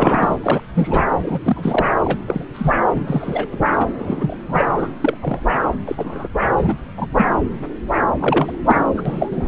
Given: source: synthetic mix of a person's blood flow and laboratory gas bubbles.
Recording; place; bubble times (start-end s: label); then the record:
Doppler ultrasound of blood flow; subclavian vein
0.00-0.39 s: bubbles
0.42-0.60 s: bubbles
0.75-1.03 s: bubbles
1.22-1.40 s: bubbles
1.43-1.85 s: bubbles
1.98-2.19 s: bubbles
2.28-2.45 s: bubbles
2.54-2.73 s: bubbles
2.95-3.47 s: bubbles
3.52-3.57 s: bubbles
3.72-3.77 s: bubbles
3.80-3.86 s: bubbles
3.98-4.37 s: bubbles
4.47-4.65 s: bubbles
4.72-4.92 s: bubbles
5.01-5.60 s: bubbles
5.87-6.29 s: bubbles
6.57-6.76 s: bubbles
6.97-7.07 s: bubbles
7.17-7.27 s: bubbles
8.20-8.57 s: bubbles
8.66-8.86 s: bubbles
8.95-9.03 s: bubbles
9.05-9.48 s: bubbles
From the record:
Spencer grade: 3 (all of the cardiac periods contain showers or single bubble signals, but not dominating or overriding the cardiac motion signals); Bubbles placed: anywhere in the cardiac cycle